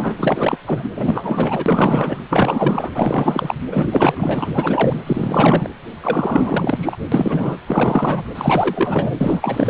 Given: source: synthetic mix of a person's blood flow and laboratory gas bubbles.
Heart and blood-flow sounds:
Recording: Doppler ultrasound of blood flow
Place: precordium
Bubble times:
0.00-0.15 s: bubbles
0.17-0.59 s: bubbles
0.66-0.83 s: bubbles
0.95-2.20 s: bubbles
2.29-2.92 s: bubbles
2.94-3.55 s: bubbles
3.71-5.02 s: bubbles
5.07-5.68 s: bubbles
6.02-6.96 s: bubbles
7.12-7.57 s: bubbles
7.67-8.23 s: bubbles
8.35-9.15 s: bubbles
9.20-9.70 s: bubbles
From the record:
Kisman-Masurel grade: 444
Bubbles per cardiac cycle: continuous sound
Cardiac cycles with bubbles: 100%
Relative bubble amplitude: maximal (0.775 to 0.999)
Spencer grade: 4 (maximum detectable bubble signal sounding continuously throughout systole and diastole of every cardiac period, and overriding the amplitude of the normal cardiac signals)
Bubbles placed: anywhere in the cardiac cycle

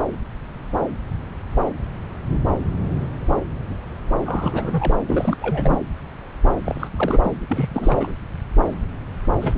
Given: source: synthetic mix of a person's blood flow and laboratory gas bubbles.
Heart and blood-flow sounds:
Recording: Doppler ultrasound of blood flow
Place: subclavian vein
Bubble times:
4.25-5.38 s: bubbles
5.41-5.79 s: bubbles
6.65-6.88 s: bubbles
6.96-7.32 s: bubbles
7.49-7.70 s: bubbles
7.74-8.11 s: bubbles
9.41-9.58 s: bubbles
From the record:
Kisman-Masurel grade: 332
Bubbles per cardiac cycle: rolling drumbeat, 9 or more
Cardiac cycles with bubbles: 50 to 99%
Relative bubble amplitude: moderate (0.250 to 0.450)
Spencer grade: 3 (all of the cardiac periods contain showers or single bubble signals, but not dominating or overriding the cardiac motion signals)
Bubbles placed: anywhere in the cardiac cycle

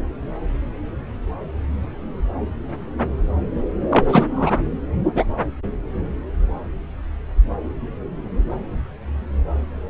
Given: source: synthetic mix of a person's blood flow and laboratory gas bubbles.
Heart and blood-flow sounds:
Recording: Doppler ultrasound of blood flow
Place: subclavian vein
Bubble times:
3.90-4.05 s: bubbles
4.08-4.26 s: bubbles
4.36-4.62 s: bubbles
5.15-5.25 s: bubbles
From the record:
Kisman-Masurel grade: 223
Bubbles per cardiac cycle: several, 3 to 8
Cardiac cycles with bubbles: 10 to 50%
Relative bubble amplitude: loud (0.450 to 0.775)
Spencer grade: 2 (many but less than half of the cardiac periods contain bubble signals, singularly or in groups)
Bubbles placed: anywhere in the cardiac cycle

